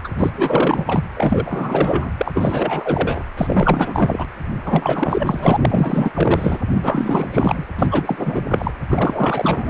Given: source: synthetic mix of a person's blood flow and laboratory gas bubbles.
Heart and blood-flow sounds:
Doppler ultrasound of blood flow; precordium
0.04-0.08 s: bubbles
0.18-1.05 s: bubbles
1.15-2.12 s: bubbles
2.17-3.23 s: bubbles
3.37-4.27 s: bubbles
4.66-5.57 s: bubbles
5.62-6.12 s: bubbles
6.15-6.59 s: bubbles
6.75-7.66 s: bubbles
7.79-7.87 s: bubbles
7.91-8.42 s: bubbles
8.48-8.71 s: bubbles
8.89-9.70 s: bubbles
From the record:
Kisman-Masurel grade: 444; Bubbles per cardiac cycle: continuous sound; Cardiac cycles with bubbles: 100%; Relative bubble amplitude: maximal (0.775 to 0.999); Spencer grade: 4 (maximum detectable bubble signal sounding continuously throughout systole and diastole of every cardiac period, and overriding the amplitude of the normal cardiac signals); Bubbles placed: anywhere in the cardiac cycle

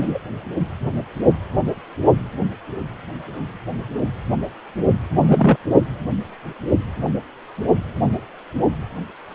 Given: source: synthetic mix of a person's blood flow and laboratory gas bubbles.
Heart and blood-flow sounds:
Doppler ultrasound of blood flow; precordium
0.00-0.18 s: bubbles
5.22-5.57 s: bubbles
From the record:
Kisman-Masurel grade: 223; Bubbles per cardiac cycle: several, 3 to 8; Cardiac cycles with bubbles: 10 to 50%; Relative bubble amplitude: loud (0.450 to 0.775); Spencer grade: 2 (many but less than half of the cardiac periods contain bubble signals, singularly or in groups); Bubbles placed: only in the low amplitude regions of the cardiac cycle

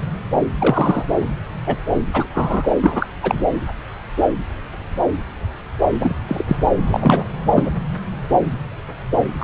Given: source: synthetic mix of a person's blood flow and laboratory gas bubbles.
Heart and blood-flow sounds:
Doppler ultrasound of blood flow; subclavian vein
0.58-1.05 s: bubbles
1.19-1.25 s: bubbles
1.66-1.76 s: bubbles
2.13-2.27 s: bubbles
2.33-2.69 s: bubbles
2.81-3.06 s: bubbles
3.23-3.44 s: bubbles
5.99-6.14 s: bubbles
6.27-6.43 s: bubbles
6.46-6.57 s: bubbles
6.87-7.23 s: bubbles
7.55-7.70 s: bubbles
9.39-9.44 s: bubbles
From the record:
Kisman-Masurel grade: 223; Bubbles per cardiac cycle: several, 3 to 8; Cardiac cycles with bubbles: 10 to 50%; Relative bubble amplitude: loud (0.450 to 0.775); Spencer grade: 2 (many but less than half of the cardiac periods contain bubble signals, singularly or in groups); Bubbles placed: anywhere in the cardiac cycle

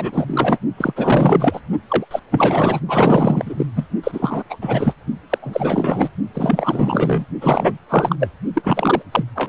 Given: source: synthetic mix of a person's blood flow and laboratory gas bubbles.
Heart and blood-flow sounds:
Doppler ultrasound of blood flow; precordium
0.00-0.58 s: bubbles
0.77-0.93 s: bubbles
0.96-1.60 s: bubbles
1.90-2.05 s: bubbles
2.10-2.19 s: bubbles
2.31-2.80 s: bubbles
2.88-3.67 s: bubbles
3.75-3.84 s: bubbles
4.04-4.44 s: bubbles
4.50-4.57 s: bubbles
4.61-4.93 s: bubbles
5.29-5.38 s: bubbles
5.42-6.09 s: bubbles
6.34-7.25 s: bubbles
7.41-7.77 s: bubbles
7.89-8.16 s: bubbles
8.19-8.29 s: bubbles
8.53-9.03 s: bubbles
9.12-9.25 s: bubbles
9.35-9.48 s: bubbles
From the record:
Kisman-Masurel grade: 444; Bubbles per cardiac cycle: continuous sound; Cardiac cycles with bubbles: 100%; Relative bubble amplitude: maximal (0.775 to 0.999); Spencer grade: 4 (maximum detectable bubble signal sounding continuously throughout systole and diastole of every cardiac period, and overriding the amplitude of the normal cardiac signals); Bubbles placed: only in the low amplitude regions of the cardiac cycle

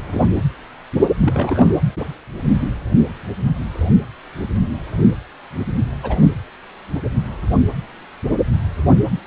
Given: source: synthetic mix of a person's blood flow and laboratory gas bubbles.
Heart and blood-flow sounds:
Doppler ultrasound of blood flow; precordium
0.00-0.29 s: bubbles
1.21-1.76 s: bubbles
6.03-6.32 s: bubbles
From the record:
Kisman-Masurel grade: 222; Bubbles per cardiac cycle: several, 3 to 8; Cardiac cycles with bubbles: 10 to 50%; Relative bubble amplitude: moderate (0.250 to 0.450); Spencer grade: 2 (many but less than half of the cardiac periods contain bubble signals, singularly or in groups); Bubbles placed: anywhere in the cardiac cycle

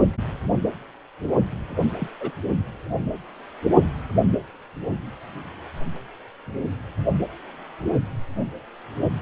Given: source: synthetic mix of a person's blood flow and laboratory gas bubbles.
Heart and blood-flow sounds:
Doppler ultrasound of blood flow; precordium
1.99-2.08 s: bubbles
2.20-2.32 s: bubbles
From the record:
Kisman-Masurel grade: 121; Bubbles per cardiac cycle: 1 to 2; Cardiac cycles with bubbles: 10 to 50%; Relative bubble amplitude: barely perceptible (0.100 to 0.250); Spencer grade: 2 (many but less than half of the cardiac periods contain bubble signals, singularly or in groups); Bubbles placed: only in the low amplitude regions of the cardiac cycle

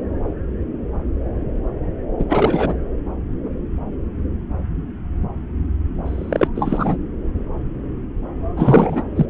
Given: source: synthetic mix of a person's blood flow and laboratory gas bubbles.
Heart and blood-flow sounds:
Doppler ultrasound of blood flow; subclavian vein
2.19-2.25 s: bubbles
2.29-2.75 s: bubbles
6.04-6.48 s: bubbles
6.55-6.97 s: bubbles
8.56-9.04 s: bubbles
9.15-9.26 s: bubbles
From the record:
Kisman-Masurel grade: 223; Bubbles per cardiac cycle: several, 3 to 8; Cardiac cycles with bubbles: 10 to 50%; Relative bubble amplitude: loud (0.450 to 0.775); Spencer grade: 2 (many but less than half of the cardiac periods contain bubble signals, singularly or in groups); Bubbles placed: anywhere in the cardiac cycle

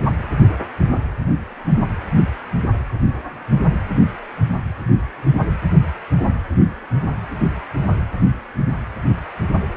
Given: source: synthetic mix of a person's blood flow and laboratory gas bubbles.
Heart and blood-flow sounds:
Doppler ultrasound of blood flow; precordium
no bubbles
From the record:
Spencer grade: 0 (complete lack of bubble signals)

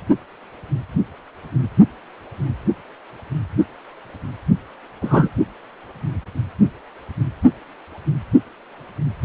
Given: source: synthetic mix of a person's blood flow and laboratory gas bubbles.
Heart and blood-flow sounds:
Doppler ultrasound of blood flow; precordium
5.01-5.30 s: bubbles
From the record:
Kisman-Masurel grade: 113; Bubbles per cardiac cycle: 1 to 2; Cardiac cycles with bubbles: 1 to 10%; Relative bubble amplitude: loud (0.450 to 0.775); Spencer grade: 1 (occasional bubble signal discernible with the cardiac motion signal, with majority of cardiac periods free of bubbles); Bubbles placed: only in the low amplitude regions of the cardiac cycle

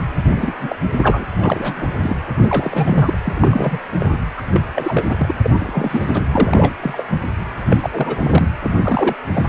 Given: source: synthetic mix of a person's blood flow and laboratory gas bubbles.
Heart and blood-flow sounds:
Doppler ultrasound of blood flow; precordium
0.26-0.52 s: bubbles
0.60-0.75 s: bubbles
0.97-1.26 s: bubbles
1.38-1.90 s: bubbles
2.00-2.16 s: bubbles
2.38-3.18 s: bubbles
3.24-3.79 s: bubbles
4.00-4.17 s: bubbles
4.37-4.42 s: bubbles
4.53-4.62 s: bubbles
4.75-5.32 s: bubbles
5.43-6.26 s: bubbles
6.32-6.74 s: bubbles
6.81-7.04 s: bubbles
7.10-7.19 s: bubbles
7.69-8.50 s: bubbles
8.62-9.15 s: bubbles
9.33-9.45 s: bubbles
From the record:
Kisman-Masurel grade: 342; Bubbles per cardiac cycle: rolling drumbeat, 9 or more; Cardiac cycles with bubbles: 100%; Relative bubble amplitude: moderate (0.250 to 0.450); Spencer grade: 3 (all of the cardiac periods contain showers or single bubble signals, but not dominating or overriding the cardiac motion signals); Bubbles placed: anywhere in the cardiac cycle

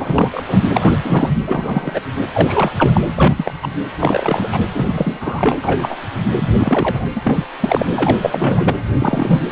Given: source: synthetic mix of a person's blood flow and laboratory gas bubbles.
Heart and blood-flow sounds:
Doppler ultrasound of blood flow; precordium
0.00-0.43 s: bubbles
0.46-0.64 s: bubbles
0.74-0.98 s: bubbles
1.02-1.32 s: bubbles
1.46-2.00 s: bubbles
2.33-2.71 s: bubbles
2.78-3.01 s: bubbles
3.16-3.54 s: bubbles
3.62-3.68 s: bubbles
3.99-4.48 s: bubbles
4.52-4.62 s: bubbles
4.75-5.58 s: bubbles
5.62-5.98 s: bubbles
6.36-6.50 s: bubbles
6.58-7.05 s: bubbles
7.15-7.45 s: bubbles
7.60-7.86 s: bubbles
7.95-8.18 s: bubbles
8.21-8.73 s: bubbles
8.98-9.40 s: bubbles
From the record:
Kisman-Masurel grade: 243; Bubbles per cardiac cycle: several, 3 to 8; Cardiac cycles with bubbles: 100%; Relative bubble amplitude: loud (0.450 to 0.775); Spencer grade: 3 (all of the cardiac periods contain showers or single bubble signals, but not dominating or overriding the cardiac motion signals); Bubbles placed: anywhere in the cardiac cycle

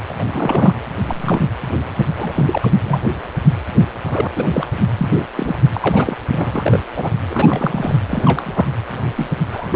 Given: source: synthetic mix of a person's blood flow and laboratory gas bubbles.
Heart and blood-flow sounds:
Doppler ultrasound of blood flow; precordium
0.09-0.14 s: bubbles
0.18-0.74 s: bubbles
1.06-1.47 s: bubbles
2.15-2.58 s: bubbles
2.61-3.01 s: bubbles
4.07-4.28 s: bubbles
4.35-4.46 s: bubbles
4.52-4.66 s: bubbles
4.98-5.09 s: bubbles
5.13-5.25 s: bubbles
5.37-5.59 s: bubbles
5.74-6.17 s: bubbles
6.31-6.79 s: bubbles
6.96-7.10 s: bubbles
7.29-7.98 s: bubbles
8.08-8.72 s: bubbles
9.15-9.29 s: bubbles
9.52-9.68 s: bubbles
9.71-9.76 s: bubbles
From the record:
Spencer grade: 3 (all of the cardiac periods contain showers or single bubble signals, but not dominating or overriding the cardiac motion signals); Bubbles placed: anywhere in the cardiac cycle

